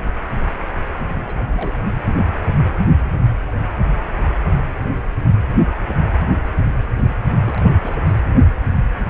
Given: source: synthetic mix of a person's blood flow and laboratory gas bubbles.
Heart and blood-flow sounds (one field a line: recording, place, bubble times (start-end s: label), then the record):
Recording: Doppler ultrasound of blood flow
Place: precordium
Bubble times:
1.12-2.10 s: bubbles
7.45-7.72 s: bubbles
7.81-7.96 s: bubbles
8.06-8.20 s: bubbles
From the record:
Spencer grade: 2 (many but less than half of the cardiac periods contain bubble signals, singularly or in groups)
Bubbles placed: anywhere in the cardiac cycle